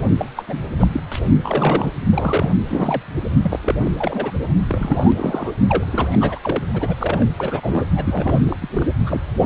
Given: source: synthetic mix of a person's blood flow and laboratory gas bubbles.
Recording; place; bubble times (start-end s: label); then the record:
Doppler ultrasound of blood flow; precordium
0.00-0.11 s: bubbles
0.17-0.30 s: bubbles
0.36-0.45 s: bubbles
0.47-0.58 s: bubbles
0.79-0.87 s: bubbles
0.92-1.01 s: bubbles
1.11-1.20 s: bubbles
1.24-1.36 s: bubbles
1.44-1.91 s: bubbles
2.09-2.52 s: bubbles
2.68-3.02 s: bubbles
3.42-3.60 s: bubbles
3.62-3.75 s: bubbles
3.85-3.90 s: bubbles
3.97-4.31 s: bubbles
4.69-5.12 s: bubbles
5.15-5.52 s: bubbles
5.68-6.39 s: bubbles
6.42-6.62 s: bubbles
6.73-6.96 s: bubbles
6.98-7.28 s: bubbles
7.37-7.86 s: bubbles
7.96-8.40 s: bubbles
8.46-8.56 s: bubbles
8.61-8.92 s: bubbles
9.06-9.20 s: bubbles
9.40-9.46 s: bubbles
From the record:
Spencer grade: 3 (all of the cardiac periods contain showers or single bubble signals, but not dominating or overriding the cardiac motion signals); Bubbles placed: anywhere in the cardiac cycle